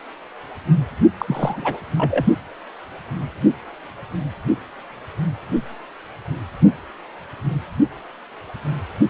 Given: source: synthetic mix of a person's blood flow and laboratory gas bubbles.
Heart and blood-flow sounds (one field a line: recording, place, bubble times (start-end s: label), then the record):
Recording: Doppler ultrasound of blood flow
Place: precordium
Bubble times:
1.18-1.79 s: bubbles
1.96-2.25 s: bubbles
From the record:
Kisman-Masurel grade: 222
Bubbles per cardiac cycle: several, 3 to 8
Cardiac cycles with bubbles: 10 to 50%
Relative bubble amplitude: moderate (0.250 to 0.450)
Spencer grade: 2 (many but less than half of the cardiac periods contain bubble signals, singularly or in groups)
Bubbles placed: only in the low amplitude regions of the cardiac cycle